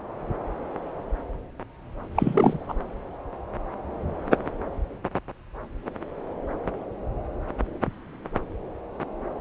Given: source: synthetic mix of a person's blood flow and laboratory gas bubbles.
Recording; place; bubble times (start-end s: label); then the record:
Doppler ultrasound of blood flow; subclavian vein
2.15-2.58 s: bubbles
2.69-2.74 s: bubbles
From the record:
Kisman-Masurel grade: 222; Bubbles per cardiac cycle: several, 3 to 8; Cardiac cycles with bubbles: 10 to 50%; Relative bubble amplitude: moderate (0.250 to 0.450); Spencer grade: 2 (many but less than half of the cardiac periods contain bubble signals, singularly or in groups); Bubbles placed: anywhere in the cardiac cycle